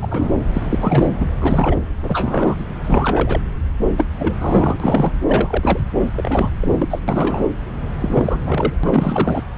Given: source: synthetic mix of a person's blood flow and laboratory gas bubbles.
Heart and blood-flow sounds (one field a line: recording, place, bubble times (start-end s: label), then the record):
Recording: Doppler ultrasound of blood flow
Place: subclavian vein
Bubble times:
0.00-0.31 s: bubbles
0.54-1.05 s: bubbles
1.20-1.33 s: bubbles
1.39-1.76 s: bubbles
2.02-2.55 s: bubbles
2.84-3.40 s: bubbles
3.97-4.04 s: bubbles
4.18-4.34 s: bubbles
4.40-5.12 s: bubbles
5.26-5.79 s: bubbles
6.16-6.49 s: bubbles
6.61-6.73 s: bubbles
6.79-6.99 s: bubbles
7.08-7.44 s: bubbles
8.00-8.38 s: bubbles
8.46-8.74 s: bubbles
8.83-9.43 s: bubbles
From the record:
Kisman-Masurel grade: 342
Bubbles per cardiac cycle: rolling drumbeat, 9 or more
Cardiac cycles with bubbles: 100%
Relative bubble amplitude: moderate (0.250 to 0.450)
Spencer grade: 3 (all of the cardiac periods contain showers or single bubble signals, but not dominating or overriding the cardiac motion signals)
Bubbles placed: anywhere in the cardiac cycle